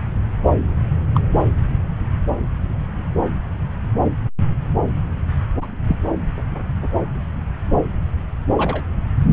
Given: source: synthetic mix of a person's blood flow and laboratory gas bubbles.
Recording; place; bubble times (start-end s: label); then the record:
Doppler ultrasound of blood flow; subclavian vein
1.15-1.21 s: bubbles
5.61-5.66 s: bubbles
5.88-5.96 s: bubbles
8.57-8.84 s: bubbles
From the record:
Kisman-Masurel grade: 122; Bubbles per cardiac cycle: 1 to 2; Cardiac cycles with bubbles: 10 to 50%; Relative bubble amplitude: moderate (0.250 to 0.450); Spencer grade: 2 (many but less than half of the cardiac periods contain bubble signals, singularly or in groups); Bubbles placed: anywhere in the cardiac cycle